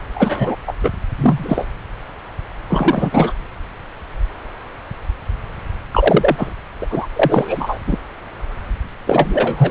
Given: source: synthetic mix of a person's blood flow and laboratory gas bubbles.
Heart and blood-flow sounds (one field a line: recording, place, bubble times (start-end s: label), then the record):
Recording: Doppler ultrasound of blood flow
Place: subclavian vein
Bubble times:
0.15-0.56 s: bubbles
0.67-0.72 s: bubbles
0.83-0.91 s: bubbles
1.19-1.66 s: bubbles
2.69-3.33 s: bubbles
5.91-6.53 s: bubbles
6.80-6.86 s: bubbles
6.90-7.07 s: bubbles
7.12-7.79 s: bubbles
7.87-7.98 s: bubbles
9.06-9.71 s: bubbles
From the record:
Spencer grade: 2 (many but less than half of the cardiac periods contain bubble signals, singularly or in groups)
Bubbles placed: anywhere in the cardiac cycle